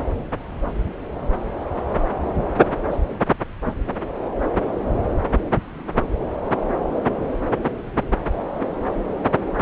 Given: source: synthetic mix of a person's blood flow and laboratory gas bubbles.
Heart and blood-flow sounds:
Doppler ultrasound of blood flow; subclavian vein
2.90-2.96 s: bubbles
3.65-3.72 s: bubbles
From the record:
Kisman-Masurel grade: 112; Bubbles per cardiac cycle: 1 to 2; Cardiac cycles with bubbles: 1 to 10%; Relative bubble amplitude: moderate (0.250 to 0.450); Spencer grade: 1 (occasional bubble signal discernible with the cardiac motion signal, with majority of cardiac periods free of bubbles); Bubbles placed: anywhere in the cardiac cycle

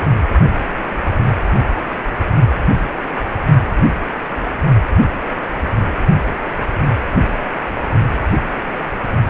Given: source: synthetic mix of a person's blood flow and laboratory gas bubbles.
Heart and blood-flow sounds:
Doppler ultrasound of blood flow; precordium
0.00-0.04 s: bubbles
From the record:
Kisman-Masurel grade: 212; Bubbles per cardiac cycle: several, 3 to 8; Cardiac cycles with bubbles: 1 to 10%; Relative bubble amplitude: moderate (0.250 to 0.450); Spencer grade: 1 (occasional bubble signal discernible with the cardiac motion signal, with majority of cardiac periods free of bubbles); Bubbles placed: only in the low amplitude regions of the cardiac cycle

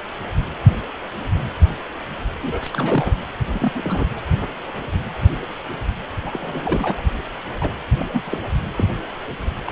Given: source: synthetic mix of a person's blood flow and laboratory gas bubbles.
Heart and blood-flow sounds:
Doppler ultrasound of blood flow; precordium
2.41-2.71 s: bubbles
2.73-3.18 s: bubbles
3.53-3.72 s: bubbles
3.75-4.06 s: bubbles
6.25-7.02 s: bubbles
7.60-7.73 s: bubbles
7.99-8.04 s: bubbles
8.13-8.21 s: bubbles
8.25-8.38 s: bubbles
8.77-8.95 s: bubbles
9.66-9.72 s: bubbles
From the record:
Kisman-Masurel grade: 222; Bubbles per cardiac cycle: several, 3 to 8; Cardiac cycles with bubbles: 10 to 50%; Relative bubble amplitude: moderate (0.250 to 0.450); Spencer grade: 2 (many but less than half of the cardiac periods contain bubble signals, singularly or in groups); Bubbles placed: anywhere in the cardiac cycle

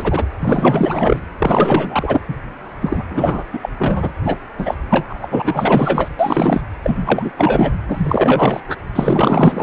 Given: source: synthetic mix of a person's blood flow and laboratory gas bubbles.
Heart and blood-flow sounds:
Doppler ultrasound of blood flow; precordium
0.00-0.27 s: bubbles
0.40-1.21 s: bubbles
1.39-2.21 s: bubbles
2.28-2.36 s: bubbles
2.81-3.04 s: bubbles
3.10-3.43 s: bubbles
3.53-3.58 s: bubbles
3.62-3.70 s: bubbles
3.78-4.14 s: bubbles
4.24-4.38 s: bubbles
4.58-4.75 s: bubbles
4.90-5.27 s: bubbles
5.30-6.08 s: bubbles
6.19-6.61 s: bubbles
6.83-7.31 s: bubbles
7.38-7.74 s: bubbles
7.88-8.61 s: bubbles
8.68-8.76 s: bubbles
8.95-9.63 s: bubbles
From the record:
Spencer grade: 4 (maximum detectable bubble signal sounding continuously throughout systole and diastole of every cardiac period, and overriding the amplitude of the normal cardiac signals); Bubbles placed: anywhere in the cardiac cycle

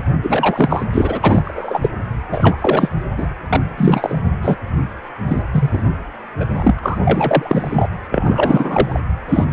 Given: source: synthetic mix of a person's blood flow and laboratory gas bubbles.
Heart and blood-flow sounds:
Doppler ultrasound of blood flow; precordium
0.23-0.84 s: bubbles
0.92-1.20 s: bubbles
1.23-1.89 s: bubbles
2.31-2.57 s: bubbles
2.61-2.90 s: bubbles
3.17-3.27 s: bubbles
3.49-3.61 s: bubbles
3.77-4.19 s: bubbles
4.43-4.60 s: bubbles
5.28-5.42 s: bubbles
5.52-5.82 s: bubbles
6.40-6.47 s: bubbles
6.52-6.74 s: bubbles
6.78-6.80 s: bubbles
6.83-7.88 s: bubbles
8.11-9.00 s: bubbles
9.29-9.46 s: bubbles
From the record:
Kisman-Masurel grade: 333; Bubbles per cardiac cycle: rolling drumbeat, 9 or more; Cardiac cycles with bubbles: 50 to 99%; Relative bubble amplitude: loud (0.450 to 0.775); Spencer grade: 3 (all of the cardiac periods contain showers or single bubble signals, but not dominating or overriding the cardiac motion signals); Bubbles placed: anywhere in the cardiac cycle

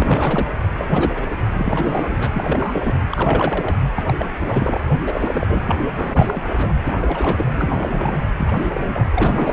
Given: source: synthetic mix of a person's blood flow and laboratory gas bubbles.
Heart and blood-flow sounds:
Doppler ultrasound of blood flow; precordium
0.00-0.46 s: bubbles
0.74-1.36 s: bubbles
1.60-2.16 s: bubbles
2.20-2.29 s: bubbles
2.32-2.93 s: bubbles
3.09-3.76 s: bubbles
3.95-4.16 s: bubbles
4.18-4.26 s: bubbles
4.40-4.79 s: bubbles
5.07-5.75 s: bubbles
5.98-6.43 s: bubbles
6.57-6.75 s: bubbles
6.84-8.23 s: bubbles
8.38-8.66 s: bubbles
8.70-9.07 s: bubbles
9.14-9.53 s: bubbles
From the record:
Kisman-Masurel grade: 342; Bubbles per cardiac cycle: rolling drumbeat, 9 or more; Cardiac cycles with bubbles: 100%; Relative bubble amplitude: moderate (0.250 to 0.450); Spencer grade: 3 (all of the cardiac periods contain showers or single bubble signals, but not dominating or overriding the cardiac motion signals); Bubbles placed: anywhere in the cardiac cycle

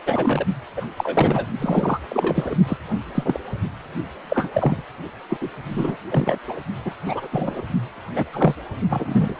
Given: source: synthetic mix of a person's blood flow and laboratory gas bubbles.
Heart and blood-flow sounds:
Doppler ultrasound of blood flow; precordium
0.06-0.46 s: bubbles
0.77-0.85 s: bubbles
0.96-1.46 s: bubbles
1.60-2.00 s: bubbles
2.10-2.56 s: bubbles
2.67-2.77 s: bubbles
3.15-3.40 s: bubbles
4.29-4.49 s: bubbles
4.53-4.82 s: bubbles
5.29-5.37 s: bubbles
5.41-5.48 s: bubbles
5.70-5.96 s: bubbles
6.10-6.38 s: bubbles
6.47-6.60 s: bubbles
6.84-6.95 s: bubbles
7.05-7.28 s: bubbles
7.32-7.62 s: bubbles
8.14-8.25 s: bubbles
8.33-8.55 s: bubbles
8.89-9.35 s: bubbles
From the record:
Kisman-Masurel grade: 242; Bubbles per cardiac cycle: several, 3 to 8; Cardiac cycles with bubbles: 100%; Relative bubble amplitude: moderate (0.250 to 0.450); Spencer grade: 3 (all of the cardiac periods contain showers or single bubble signals, but not dominating or overriding the cardiac motion signals); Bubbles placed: only in the low amplitude regions of the cardiac cycle

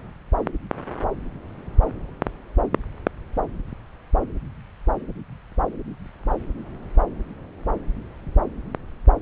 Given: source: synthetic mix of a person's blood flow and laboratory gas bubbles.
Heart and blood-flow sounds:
Doppler ultrasound of blood flow; subclavian vein
no bubbles
From the record:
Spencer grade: 0 (complete lack of bubble signals)

